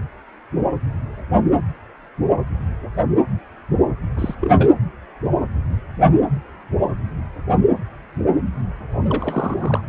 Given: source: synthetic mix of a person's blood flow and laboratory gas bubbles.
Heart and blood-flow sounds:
Doppler ultrasound of blood flow; precordium
4.17-4.35 s: bubbles
4.41-4.71 s: bubbles
9.07-9.81 s: bubbles
From the record:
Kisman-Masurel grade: 222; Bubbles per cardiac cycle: several, 3 to 8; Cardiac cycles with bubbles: 10 to 50%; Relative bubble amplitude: moderate (0.250 to 0.450); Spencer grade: 2 (many but less than half of the cardiac periods contain bubble signals, singularly or in groups); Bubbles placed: anywhere in the cardiac cycle

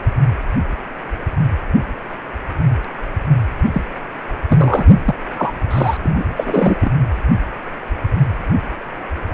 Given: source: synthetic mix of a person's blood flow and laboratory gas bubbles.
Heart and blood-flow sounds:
Doppler ultrasound of blood flow; precordium
3.73-3.81 s: bubbles
4.49-5.04 s: bubbles
5.08-5.15 s: bubbles
5.37-5.53 s: bubbles
5.71-5.97 s: bubbles
6.04-6.90 s: bubbles
From the record:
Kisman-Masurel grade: 223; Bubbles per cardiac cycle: several, 3 to 8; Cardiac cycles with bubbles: 10 to 50%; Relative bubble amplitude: loud (0.450 to 0.775); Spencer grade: 2 (many but less than half of the cardiac periods contain bubble signals, singularly or in groups); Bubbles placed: anywhere in the cardiac cycle

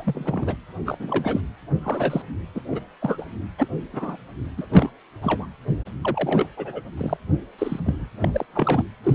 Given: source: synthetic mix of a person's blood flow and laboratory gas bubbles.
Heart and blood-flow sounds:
Doppler ultrasound of blood flow; precordium
0.00-0.56 s: bubbles
0.86-1.40 s: bubbles
1.82-2.22 s: bubbles
2.54-2.61 s: bubbles
2.70-2.79 s: bubbles
3.01-3.25 s: bubbles
3.58-3.68 s: bubbles
3.93-4.17 s: bubbles
4.57-4.67 s: bubbles
4.70-4.90 s: bubbles
5.22-5.47 s: bubbles
6.03-6.46 s: bubbles
6.57-6.82 s: bubbles
6.98-7.17 s: bubbles
7.58-7.80 s: bubbles
7.84-8.08 s: bubbles
8.21-8.30 s: bubbles
8.33-8.46 s: bubbles
8.55-8.83 s: bubbles
9.04-9.15 s: bubbles
From the record:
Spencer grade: 3 (all of the cardiac periods contain showers or single bubble signals, but not dominating or overriding the cardiac motion signals); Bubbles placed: anywhere in the cardiac cycle

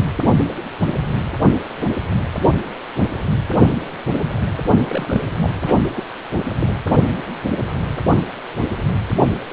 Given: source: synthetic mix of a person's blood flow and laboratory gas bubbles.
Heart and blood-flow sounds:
Doppler ultrasound of blood flow; precordium
4.85-5.22 s: bubbles
5.42-5.50 s: bubbles
5.63-5.82 s: bubbles
5.85-5.90 s: bubbles
5.95-6.04 s: bubbles
6.59-6.74 s: bubbles
From the record:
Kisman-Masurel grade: 211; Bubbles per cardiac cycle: several, 3 to 8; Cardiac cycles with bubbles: 1 to 10%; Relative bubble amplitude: barely perceptible (0.100 to 0.250); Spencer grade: 1 (occasional bubble signal discernible with the cardiac motion signal, with majority of cardiac periods free of bubbles); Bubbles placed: only in the low amplitude regions of the cardiac cycle

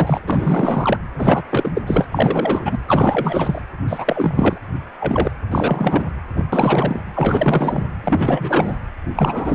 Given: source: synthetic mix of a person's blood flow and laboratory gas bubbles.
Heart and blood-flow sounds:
Doppler ultrasound of blood flow; precordium
0.00-0.20 s: bubbles
0.27-0.98 s: bubbles
1.18-1.43 s: bubbles
1.50-1.71 s: bubbles
1.75-1.82 s: bubbles
1.86-2.07 s: bubbles
2.12-2.78 s: bubbles
2.88-3.62 s: bubbles
3.87-4.60 s: bubbles
5.00-5.31 s: bubbles
5.50-6.04 s: bubbles
6.36-6.45 s: bubbles
6.52-7.00 s: bubbles
7.14-7.84 s: bubbles
8.04-8.79 s: bubbles
9.16-9.55 s: bubbles
From the record:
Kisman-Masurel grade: 444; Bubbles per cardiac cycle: continuous sound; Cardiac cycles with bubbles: 100%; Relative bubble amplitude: maximal (0.775 to 0.999); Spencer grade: 4 (maximum detectable bubble signal sounding continuously throughout systole and diastole of every cardiac period, and overriding the amplitude of the normal cardiac signals); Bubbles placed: anywhere in the cardiac cycle

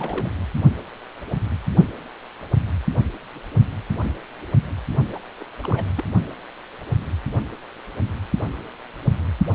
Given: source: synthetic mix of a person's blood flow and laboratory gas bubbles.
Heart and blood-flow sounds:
Doppler ultrasound of blood flow; precordium
0.00-0.31 s: bubbles
5.12-5.20 s: bubbles
5.40-5.44 s: bubbles
5.59-5.90 s: bubbles
5.96-6.04 s: bubbles
From the record:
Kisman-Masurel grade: 221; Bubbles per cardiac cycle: several, 3 to 8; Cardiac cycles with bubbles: 10 to 50%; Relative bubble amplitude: barely perceptible (0.100 to 0.250); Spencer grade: 2 (many but less than half of the cardiac periods contain bubble signals, singularly or in groups); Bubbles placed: only in the low amplitude regions of the cardiac cycle

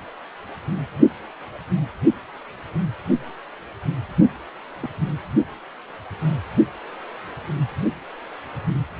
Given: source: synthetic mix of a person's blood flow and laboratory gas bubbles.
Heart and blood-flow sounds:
Doppler ultrasound of blood flow; precordium
4.80-4.88 s: bubbles
From the record:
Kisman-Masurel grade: 111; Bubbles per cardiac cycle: 1 to 2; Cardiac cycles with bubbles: 1 to 10%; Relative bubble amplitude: barely perceptible (0.100 to 0.250); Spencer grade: 1 (occasional bubble signal discernible with the cardiac motion signal, with majority of cardiac periods free of bubbles); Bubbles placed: only in the low amplitude regions of the cardiac cycle

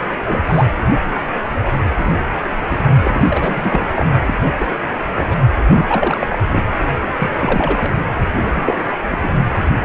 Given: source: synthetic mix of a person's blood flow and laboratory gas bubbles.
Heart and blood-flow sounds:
Doppler ultrasound of blood flow; precordium
0.25-0.43 s: bubbles
0.45-0.66 s: bubbles
1.97-2.15 s: bubbles
2.69-2.78 s: bubbles
3.01-3.81 s: bubbles
3.96-4.05 s: bubbles
4.25-4.34 s: bubbles
4.58-4.67 s: bubbles
5.16-5.35 s: bubbles
5.67-6.27 s: bubbles
6.29-6.38 s: bubbles
6.46-6.62 s: bubbles
7.18-7.30 s: bubbles
7.39-8.04 s: bubbles
8.54-8.93 s: bubbles
9.11-9.38 s: bubbles
From the record:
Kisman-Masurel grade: 242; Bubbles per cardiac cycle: several, 3 to 8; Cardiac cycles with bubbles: 100%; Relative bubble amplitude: moderate (0.250 to 0.450); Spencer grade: 3 (all of the cardiac periods contain showers or single bubble signals, but not dominating or overriding the cardiac motion signals); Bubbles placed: only in the low amplitude regions of the cardiac cycle

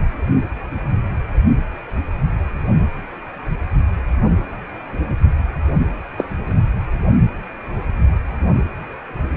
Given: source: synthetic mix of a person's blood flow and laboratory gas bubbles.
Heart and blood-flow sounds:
Doppler ultrasound of blood flow; precordium
6.18-6.24 s: bubbles
From the record:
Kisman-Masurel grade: 113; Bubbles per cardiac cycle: 1 to 2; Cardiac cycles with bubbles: 1 to 10%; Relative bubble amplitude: loud (0.450 to 0.775); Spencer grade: 1 (occasional bubble signal discernible with the cardiac motion signal, with majority of cardiac periods free of bubbles); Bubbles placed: anywhere in the cardiac cycle

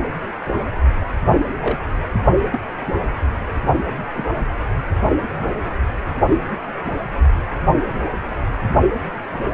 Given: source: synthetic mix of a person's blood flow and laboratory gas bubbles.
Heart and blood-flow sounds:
Doppler ultrasound of blood flow; precordium
1.61-1.78 s: bubbles
2.51-2.58 s: bubbles
4.15-4.29 s: bubbles
5.41-5.49 s: bubbles
From the record:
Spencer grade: 2 (many but less than half of the cardiac periods contain bubble signals, singularly or in groups); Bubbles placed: only in the low amplitude regions of the cardiac cycle

